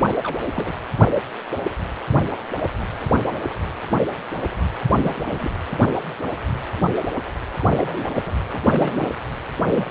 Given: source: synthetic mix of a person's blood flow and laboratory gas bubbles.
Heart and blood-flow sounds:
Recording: Doppler ultrasound of blood flow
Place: precordium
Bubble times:
0.23-0.36 s: bubbles
0.53-0.72 s: bubbles
4.85-5.24 s: bubbles
5.26-5.51 s: bubbles
7.60-7.65 s: bubbles
7.67-8.09 s: bubbles
8.14-8.33 s: bubbles
8.52-8.61 s: bubbles
8.64-9.11 s: bubbles
9.64-9.90 s: bubbles
From the record:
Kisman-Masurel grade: 221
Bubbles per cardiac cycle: several, 3 to 8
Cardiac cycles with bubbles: 10 to 50%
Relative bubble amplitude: barely perceptible (0.100 to 0.250)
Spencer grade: 2 (many but less than half of the cardiac periods contain bubble signals, singularly or in groups)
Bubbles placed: anywhere in the cardiac cycle

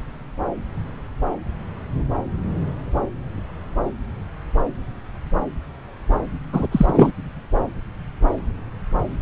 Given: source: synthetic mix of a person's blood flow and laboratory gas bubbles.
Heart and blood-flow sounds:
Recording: Doppler ultrasound of blood flow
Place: subclavian vein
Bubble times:
6.53-6.67 s: bubbles
6.71-7.12 s: bubbles
From the record:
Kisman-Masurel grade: 223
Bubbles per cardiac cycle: several, 3 to 8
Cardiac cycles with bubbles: 10 to 50%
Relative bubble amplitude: loud (0.450 to 0.775)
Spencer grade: 2 (many but less than half of the cardiac periods contain bubble signals, singularly or in groups)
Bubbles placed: anywhere in the cardiac cycle

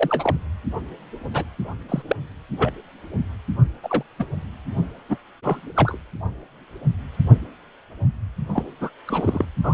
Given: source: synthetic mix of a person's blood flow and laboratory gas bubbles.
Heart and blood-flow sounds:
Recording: Doppler ultrasound of blood flow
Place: precordium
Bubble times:
0.00-0.37 s: bubbles
1.33-1.44 s: bubbles
1.89-2.02 s: bubbles
2.07-2.16 s: bubbles
2.58-2.72 s: bubbles
3.83-4.03 s: bubbles
4.19-4.25 s: bubbles
5.09-5.17 s: bubbles
5.43-5.60 s: bubbles
5.75-5.97 s: bubbles
8.54-8.65 s: bubbles
8.81-8.90 s: bubbles
9.07-9.45 s: bubbles
9.64-9.74 s: bubbles
From the record:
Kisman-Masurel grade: 232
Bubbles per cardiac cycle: several, 3 to 8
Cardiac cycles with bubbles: 50 to 99%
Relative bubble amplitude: moderate (0.250 to 0.450)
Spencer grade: 3 (all of the cardiac periods contain showers or single bubble signals, but not dominating or overriding the cardiac motion signals)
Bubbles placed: anywhere in the cardiac cycle

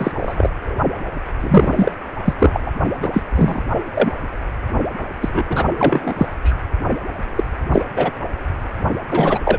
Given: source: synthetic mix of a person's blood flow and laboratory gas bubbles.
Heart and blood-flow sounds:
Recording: Doppler ultrasound of blood flow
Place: precordium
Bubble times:
0.00-0.12 s: bubbles
0.19-0.50 s: bubbles
0.55-0.76 s: bubbles
1.40-1.91 s: bubbles
2.25-2.33 s: bubbles
2.39-2.60 s: bubbles
2.66-2.71 s: bubbles
3.02-3.10 s: bubbles
3.13-3.24 s: bubbles
3.35-3.62 s: bubbles
3.93-4.11 s: bubbles
5.21-5.29 s: bubbles
5.33-5.46 s: bubbles
5.49-5.65 s: bubbles
5.77-6.13 s: bubbles
6.18-6.26 s: bubbles
6.44-6.57 s: bubbles
7.36-7.43 s: bubbles
7.73-7.82 s: bubbles
7.96-8.10 s: bubbles
9.12-9.39 s: bubbles
9.45-9.58 s: bubbles
From the record:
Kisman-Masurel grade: 233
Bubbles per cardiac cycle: several, 3 to 8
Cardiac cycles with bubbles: 50 to 99%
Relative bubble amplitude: loud (0.450 to 0.775)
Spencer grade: 3 (all of the cardiac periods contain showers or single bubble signals, but not dominating or overriding the cardiac motion signals)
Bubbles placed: anywhere in the cardiac cycle

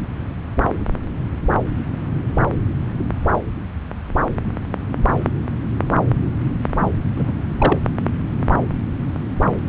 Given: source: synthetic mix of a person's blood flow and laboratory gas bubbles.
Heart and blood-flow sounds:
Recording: Doppler ultrasound of blood flow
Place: subclavian vein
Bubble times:
7.15-7.31 s: bubbles
7.58-7.77 s: bubbles
From the record:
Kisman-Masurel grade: 112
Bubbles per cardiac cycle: 1 to 2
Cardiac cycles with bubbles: 1 to 10%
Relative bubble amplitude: moderate (0.250 to 0.450)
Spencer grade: 1 (occasional bubble signal discernible with the cardiac motion signal, with majority of cardiac periods free of bubbles)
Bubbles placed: anywhere in the cardiac cycle

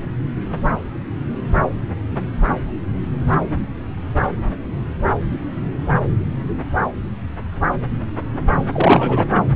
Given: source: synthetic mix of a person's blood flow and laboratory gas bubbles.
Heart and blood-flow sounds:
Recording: Doppler ultrasound of blood flow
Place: subclavian vein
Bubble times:
8.72-9.26 s: bubbles
9.30-9.42 s: bubbles
From the record:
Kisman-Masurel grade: 213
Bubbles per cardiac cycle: several, 3 to 8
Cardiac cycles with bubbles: 1 to 10%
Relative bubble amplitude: loud (0.450 to 0.775)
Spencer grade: 1 (occasional bubble signal discernible with the cardiac motion signal, with majority of cardiac periods free of bubbles)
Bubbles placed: anywhere in the cardiac cycle

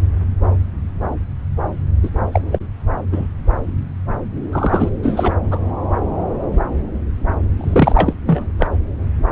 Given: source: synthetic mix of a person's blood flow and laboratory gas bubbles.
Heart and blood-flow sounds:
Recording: Doppler ultrasound of blood flow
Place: subclavian vein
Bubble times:
2.03-2.09 s: bubbles
2.31-2.42 s: bubbles
2.52-2.58 s: bubbles
3.11-3.28 s: bubbles
4.51-4.89 s: bubbles
5.02-5.33 s: bubbles
5.50-5.58 s: bubbles
7.58-8.13 s: bubbles
8.27-8.47 s: bubbles
8.59-8.67 s: bubbles
From the record:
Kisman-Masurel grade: 223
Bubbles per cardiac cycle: several, 3 to 8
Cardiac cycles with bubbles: 10 to 50%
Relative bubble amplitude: loud (0.450 to 0.775)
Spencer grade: 2 (many but less than half of the cardiac periods contain bubble signals, singularly or in groups)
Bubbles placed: anywhere in the cardiac cycle

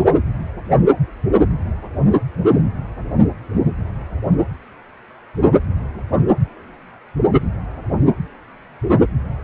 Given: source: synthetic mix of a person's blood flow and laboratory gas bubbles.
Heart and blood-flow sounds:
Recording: Doppler ultrasound of blood flow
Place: precordium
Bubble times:
no bubbles
From the record:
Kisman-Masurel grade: 000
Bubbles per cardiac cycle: 0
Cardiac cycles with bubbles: 0%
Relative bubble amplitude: no bubbles discernible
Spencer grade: 0 (complete lack of bubble signals)

